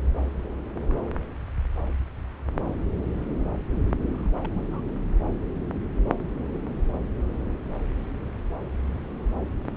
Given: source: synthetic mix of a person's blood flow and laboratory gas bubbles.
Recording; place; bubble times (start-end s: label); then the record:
Doppler ultrasound of blood flow; subclavian vein
4.11-4.68 s: bubbles
4.71-4.81 s: bubbles
4.85-4.89 s: bubbles
From the record:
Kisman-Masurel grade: 211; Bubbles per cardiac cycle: several, 3 to 8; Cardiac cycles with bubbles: 1 to 10%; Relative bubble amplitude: barely perceptible (0.100 to 0.250); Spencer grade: 1 (occasional bubble signal discernible with the cardiac motion signal, with majority of cardiac periods free of bubbles); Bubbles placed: anywhere in the cardiac cycle